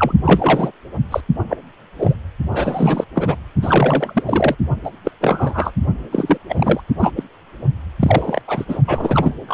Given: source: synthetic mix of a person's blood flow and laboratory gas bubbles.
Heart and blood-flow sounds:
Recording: Doppler ultrasound of blood flow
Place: precordium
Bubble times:
0.00-0.13 s: bubbles
0.25-0.71 s: bubbles
1.10-1.21 s: bubbles
1.48-1.57 s: bubbles
1.98-2.15 s: bubbles
2.51-3.04 s: bubbles
3.15-3.35 s: bubbles
3.61-4.55 s: bubbles
4.83-4.91 s: bubbles
5.04-5.12 s: bubbles
5.20-5.73 s: bubbles
6.12-6.38 s: bubbles
6.49-6.81 s: bubbles
6.99-7.11 s: bubbles
7.16-7.23 s: bubbles
7.99-8.41 s: bubbles
8.47-8.65 s: bubbles
8.68-8.79 s: bubbles
8.87-9.34 s: bubbles
9.47-9.54 s: bubbles
From the record:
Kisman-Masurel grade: 343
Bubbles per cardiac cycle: rolling drumbeat, 9 or more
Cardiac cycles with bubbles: 100%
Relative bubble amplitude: loud (0.450 to 0.775)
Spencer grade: 3 (all of the cardiac periods contain showers or single bubble signals, but not dominating or overriding the cardiac motion signals)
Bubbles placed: only in the low amplitude regions of the cardiac cycle

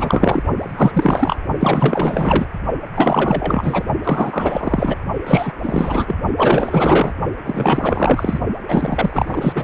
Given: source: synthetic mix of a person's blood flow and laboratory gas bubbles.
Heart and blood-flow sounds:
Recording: Doppler ultrasound of blood flow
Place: precordium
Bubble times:
0.00-0.42 s: bubbles
0.58-1.37 s: bubbles
1.59-2.46 s: bubbles
2.95-3.84 s: bubbles
4.04-4.96 s: bubbles
5.26-5.52 s: bubbles
5.62-6.15 s: bubbles
6.37-7.13 s: bubbles
7.46-8.40 s: bubbles
8.68-9.53 s: bubbles
9.55-9.64 s: bubbles
From the record:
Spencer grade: 4 (maximum detectable bubble signal sounding continuously throughout systole and diastole of every cardiac period, and overriding the amplitude of the normal cardiac signals)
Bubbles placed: only in the low amplitude regions of the cardiac cycle

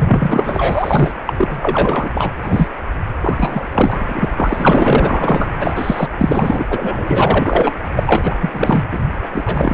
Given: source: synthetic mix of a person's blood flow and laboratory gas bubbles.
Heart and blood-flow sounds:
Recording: Doppler ultrasound of blood flow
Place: precordium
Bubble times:
0.00-1.13 s: bubbles
1.27-1.34 s: bubbles
1.37-2.10 s: bubbles
2.14-2.31 s: bubbles
2.42-2.69 s: bubbles
3.21-4.25 s: bubbles
4.36-5.49 s: bubbles
5.58-6.08 s: bubbles
6.17-6.65 s: bubbles
6.70-7.72 s: bubbles
7.96-8.35 s: bubbles
8.40-8.50 s: bubbles
8.53-8.81 s: bubbles
8.91-8.99 s: bubbles
9.29-9.74 s: bubbles
From the record:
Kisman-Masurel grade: 444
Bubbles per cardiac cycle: continuous sound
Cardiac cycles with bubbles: 100%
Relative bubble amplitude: maximal (0.775 to 0.999)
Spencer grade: 4 (maximum detectable bubble signal sounding continuously throughout systole and diastole of every cardiac period, and overriding the amplitude of the normal cardiac signals)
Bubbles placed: anywhere in the cardiac cycle

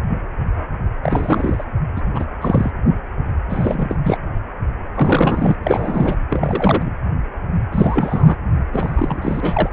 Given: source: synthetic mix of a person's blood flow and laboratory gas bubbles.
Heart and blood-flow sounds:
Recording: Doppler ultrasound of blood flow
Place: precordium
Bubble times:
1.03-1.64 s: bubbles
1.95-2.02 s: bubbles
2.14-2.25 s: bubbles
2.42-2.71 s: bubbles
3.49-3.95 s: bubbles
4.03-4.17 s: bubbles
4.94-5.57 s: bubbles
5.63-6.15 s: bubbles
6.30-6.90 s: bubbles
7.72-8.37 s: bubbles
8.73-9.70 s: bubbles
From the record:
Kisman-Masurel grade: 332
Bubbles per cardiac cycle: rolling drumbeat, 9 or more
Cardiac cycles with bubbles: 50 to 99%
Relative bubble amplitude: moderate (0.250 to 0.450)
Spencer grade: 3 (all of the cardiac periods contain showers or single bubble signals, but not dominating or overriding the cardiac motion signals)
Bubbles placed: anywhere in the cardiac cycle

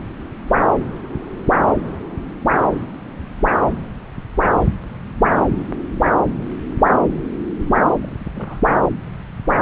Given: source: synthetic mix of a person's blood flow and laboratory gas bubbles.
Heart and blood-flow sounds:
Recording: Doppler ultrasound of blood flow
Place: subclavian vein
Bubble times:
8.02-8.16 s: bubbles
8.33-8.61 s: bubbles
From the record:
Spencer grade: 1 (occasional bubble signal discernible with the cardiac motion signal, with majority of cardiac periods free of bubbles)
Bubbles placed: anywhere in the cardiac cycle

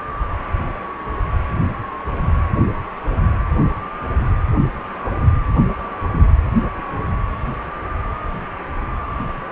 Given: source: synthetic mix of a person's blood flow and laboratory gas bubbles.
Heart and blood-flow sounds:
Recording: Doppler ultrasound of blood flow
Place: precordium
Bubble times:
no bubbles
From the record:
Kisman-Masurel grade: 000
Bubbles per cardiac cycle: 0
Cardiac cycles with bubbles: 0%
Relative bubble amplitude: no bubbles discernible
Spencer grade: 0 (complete lack of bubble signals)

